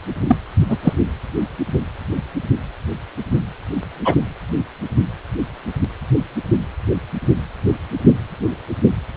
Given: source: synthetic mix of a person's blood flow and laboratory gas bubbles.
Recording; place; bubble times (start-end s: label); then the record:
Doppler ultrasound of blood flow; precordium
0.28-0.36 s: bubbles
0.69-0.78 s: bubbles
0.82-0.93 s: bubbles
4.04-4.15 s: bubbles
From the record:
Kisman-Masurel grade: 123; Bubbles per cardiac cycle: 1 to 2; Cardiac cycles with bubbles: 10 to 50%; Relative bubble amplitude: loud (0.450 to 0.775); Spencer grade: 2 (many but less than half of the cardiac periods contain bubble signals, singularly or in groups); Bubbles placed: anywhere in the cardiac cycle